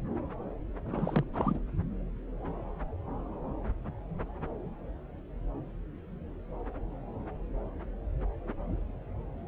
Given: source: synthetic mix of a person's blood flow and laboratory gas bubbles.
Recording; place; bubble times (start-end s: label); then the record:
Doppler ultrasound of blood flow; subclavian vein
0.86-1.24 s: bubbles
1.33-1.58 s: bubbles
From the record:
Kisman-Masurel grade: 211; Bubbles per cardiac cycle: several, 3 to 8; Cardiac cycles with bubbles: 1 to 10%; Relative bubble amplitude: barely perceptible (0.100 to 0.250); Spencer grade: 1 (occasional bubble signal discernible with the cardiac motion signal, with majority of cardiac periods free of bubbles); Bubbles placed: anywhere in the cardiac cycle